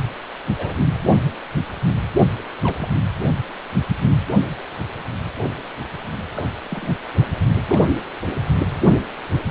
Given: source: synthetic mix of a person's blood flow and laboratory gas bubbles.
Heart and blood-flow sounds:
Doppler ultrasound of blood flow; precordium
0.58-0.75 s: bubbles
2.62-2.89 s: bubbles
6.34-6.45 s: bubbles
6.70-6.96 s: bubbles
7.69-7.83 s: bubbles
From the record:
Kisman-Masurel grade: 121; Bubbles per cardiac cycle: 1 to 2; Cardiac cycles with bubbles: 10 to 50%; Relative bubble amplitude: barely perceptible (0.100 to 0.250); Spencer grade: 2 (many but less than half of the cardiac periods contain bubble signals, singularly or in groups); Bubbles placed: anywhere in the cardiac cycle

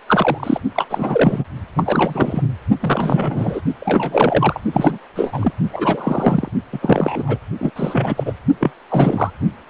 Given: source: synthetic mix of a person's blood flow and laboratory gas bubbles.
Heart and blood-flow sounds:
Doppler ultrasound of blood flow; precordium
0.08-0.60 s: bubbles
0.74-0.87 s: bubbles
0.90-1.45 s: bubbles
1.76-2.43 s: bubbles
2.80-3.61 s: bubbles
3.80-4.61 s: bubbles
4.72-4.98 s: bubbles
5.15-5.52 s: bubbles
5.72-6.48 s: bubbles
6.72-6.79 s: bubbles
6.82-7.38 s: bubbles
7.58-7.71 s: bubbles
7.75-8.33 s: bubbles
8.60-8.71 s: bubbles
8.89-9.31 s: bubbles
From the record:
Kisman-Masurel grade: 333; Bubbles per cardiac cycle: rolling drumbeat, 9 or more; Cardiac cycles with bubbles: 50 to 99%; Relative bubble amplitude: loud (0.450 to 0.775); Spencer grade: 3 (all of the cardiac periods contain showers or single bubble signals, but not dominating or overriding the cardiac motion signals); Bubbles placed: only in the low amplitude regions of the cardiac cycle

